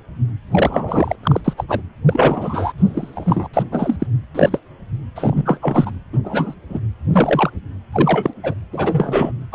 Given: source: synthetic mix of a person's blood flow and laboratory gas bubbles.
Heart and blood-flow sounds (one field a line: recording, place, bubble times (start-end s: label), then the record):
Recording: Doppler ultrasound of blood flow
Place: precordium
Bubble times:
0.51-1.16 s: bubbles
1.23-1.41 s: bubbles
1.44-1.54 s: bubbles
1.57-1.64 s: bubbles
1.68-1.82 s: bubbles
2.06-2.73 s: bubbles
2.78-3.48 s: bubbles
3.54-3.63 s: bubbles
3.71-3.96 s: bubbles
4.00-4.07 s: bubbles
4.34-4.59 s: bubbles
5.16-5.59 s: bubbles
5.62-5.91 s: bubbles
6.12-6.19 s: bubbles
6.24-6.55 s: bubbles
6.70-6.80 s: bubbles
7.12-7.50 s: bubbles
7.92-8.34 s: bubbles
8.43-8.54 s: bubbles
8.71-9.32 s: bubbles
9.52-9.55 s: bubbles
From the record:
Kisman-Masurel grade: 233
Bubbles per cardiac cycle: several, 3 to 8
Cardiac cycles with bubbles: 50 to 99%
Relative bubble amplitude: loud (0.450 to 0.775)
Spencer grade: 3 (all of the cardiac periods contain showers or single bubble signals, but not dominating or overriding the cardiac motion signals)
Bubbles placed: anywhere in the cardiac cycle